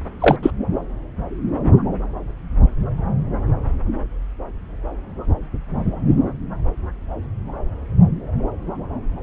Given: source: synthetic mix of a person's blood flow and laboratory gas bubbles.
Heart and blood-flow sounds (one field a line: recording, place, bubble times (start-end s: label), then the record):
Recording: Doppler ultrasound of blood flow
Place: subclavian vein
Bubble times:
0.20-0.36 s: bubbles
0.42-0.51 s: bubbles
From the record:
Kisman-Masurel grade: 213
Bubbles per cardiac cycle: several, 3 to 8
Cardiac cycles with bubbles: 1 to 10%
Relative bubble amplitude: loud (0.450 to 0.775)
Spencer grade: 1 (occasional bubble signal discernible with the cardiac motion signal, with majority of cardiac periods free of bubbles)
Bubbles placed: anywhere in the cardiac cycle